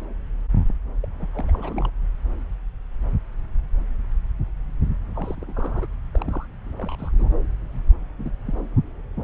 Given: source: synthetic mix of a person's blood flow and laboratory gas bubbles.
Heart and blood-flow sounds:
Doppler ultrasound of blood flow; subclavian vein
1.02-1.08 s: bubbles
1.19-1.27 s: bubbles
1.33-1.45 s: bubbles
1.48-1.90 s: bubbles
5.14-5.87 s: bubbles
6.13-6.46 s: bubbles
6.64-6.75 s: bubbles
6.78-7.25 s: bubbles
8.18-8.35 s: bubbles
8.46-8.54 s: bubbles
From the record:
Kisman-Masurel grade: 221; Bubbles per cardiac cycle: several, 3 to 8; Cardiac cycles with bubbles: 10 to 50%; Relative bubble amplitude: barely perceptible (0.100 to 0.250); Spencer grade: 2 (many but less than half of the cardiac periods contain bubble signals, singularly or in groups); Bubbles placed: anywhere in the cardiac cycle

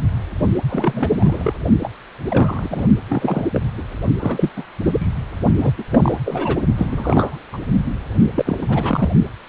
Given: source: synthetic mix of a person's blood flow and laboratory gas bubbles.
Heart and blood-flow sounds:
Doppler ultrasound of blood flow; precordium
0.69-1.53 s: bubbles
1.82-1.89 s: bubbles
2.28-2.86 s: bubbles
3.08-3.47 s: bubbles
3.52-3.61 s: bubbles
3.77-3.82 s: bubbles
4.19-4.50 s: bubbles
4.56-4.63 s: bubbles
4.80-5.07 s: bubbles
5.58-5.71 s: bubbles
5.77-5.83 s: bubbles
5.91-6.15 s: bubbles
6.25-6.58 s: bubbles
6.76-7.39 s: bubbles
7.53-7.59 s: bubbles
8.36-9.12 s: bubbles
From the record:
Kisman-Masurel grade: 342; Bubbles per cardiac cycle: rolling drumbeat, 9 or more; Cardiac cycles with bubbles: 100%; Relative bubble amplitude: moderate (0.250 to 0.450); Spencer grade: 3 (all of the cardiac periods contain showers or single bubble signals, but not dominating or overriding the cardiac motion signals); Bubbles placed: only in the low amplitude regions of the cardiac cycle

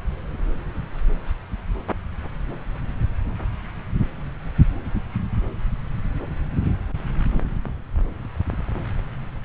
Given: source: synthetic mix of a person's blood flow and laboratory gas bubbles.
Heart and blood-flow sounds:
Doppler ultrasound of blood flow; subclavian vein
no bubbles
From the record:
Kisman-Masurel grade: 000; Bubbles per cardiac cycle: 0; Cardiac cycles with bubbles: 0%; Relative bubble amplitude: no bubbles discernible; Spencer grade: 0 (complete lack of bubble signals)

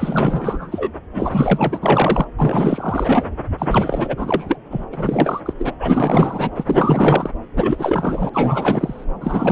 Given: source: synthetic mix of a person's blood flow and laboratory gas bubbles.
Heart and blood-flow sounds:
Doppler ultrasound of blood flow; subclavian vein
0.00-0.92 s: bubbles
1.11-2.24 s: bubbles
2.38-3.26 s: bubbles
3.58-4.59 s: bubbles
4.70-4.84 s: bubbles
4.92-5.41 s: bubbles
5.45-5.54 s: bubbles
5.58-5.73 s: bubbles
5.79-6.51 s: bubbles
6.54-7.31 s: bubbles
7.56-8.29 s: bubbles
8.33-9.04 s: bubbles
9.21-9.52 s: bubbles
From the record:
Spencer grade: 4 (maximum detectable bubble signal sounding continuously throughout systole and diastole of every cardiac period, and overriding the amplitude of the normal cardiac signals); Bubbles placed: anywhere in the cardiac cycle

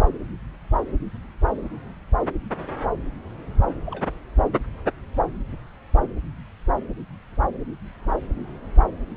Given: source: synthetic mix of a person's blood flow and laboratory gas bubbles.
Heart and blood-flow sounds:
Doppler ultrasound of blood flow; subclavian vein
3.85-4.07 s: bubbles
From the record:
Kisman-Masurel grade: 111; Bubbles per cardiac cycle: 1 to 2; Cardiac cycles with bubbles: 1 to 10%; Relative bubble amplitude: barely perceptible (0.100 to 0.250); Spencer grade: 1 (occasional bubble signal discernible with the cardiac motion signal, with majority of cardiac periods free of bubbles); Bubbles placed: anywhere in the cardiac cycle

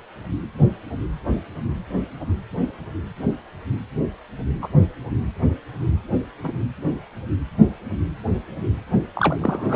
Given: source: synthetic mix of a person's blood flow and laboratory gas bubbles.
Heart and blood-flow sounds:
Doppler ultrasound of blood flow; precordium
4.62-4.68 s: bubbles
6.43-6.53 s: bubbles
9.15-9.36 s: bubbles
9.41-9.76 s: bubbles
From the record:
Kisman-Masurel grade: 123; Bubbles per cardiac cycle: 1 to 2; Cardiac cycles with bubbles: 10 to 50%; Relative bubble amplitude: loud (0.450 to 0.775); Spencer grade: 2 (many but less than half of the cardiac periods contain bubble signals, singularly or in groups); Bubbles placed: only in the low amplitude regions of the cardiac cycle

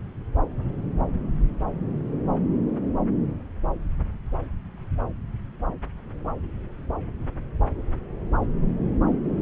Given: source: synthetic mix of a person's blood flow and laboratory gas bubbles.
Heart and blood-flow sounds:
Doppler ultrasound of blood flow; subclavian vein
no bubbles
From the record:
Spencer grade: 0 (complete lack of bubble signals)

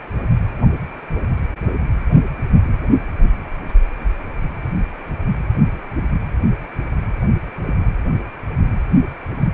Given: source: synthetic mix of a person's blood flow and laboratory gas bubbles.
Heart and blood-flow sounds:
Doppler ultrasound of blood flow; precordium
7.66-7.75 s: bubbles
From the record:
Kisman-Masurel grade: 111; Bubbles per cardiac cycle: 1 to 2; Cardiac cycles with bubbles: 1 to 10%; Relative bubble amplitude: barely perceptible (0.100 to 0.250); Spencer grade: 1 (occasional bubble signal discernible with the cardiac motion signal, with majority of cardiac periods free of bubbles); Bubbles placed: only in the low amplitude regions of the cardiac cycle

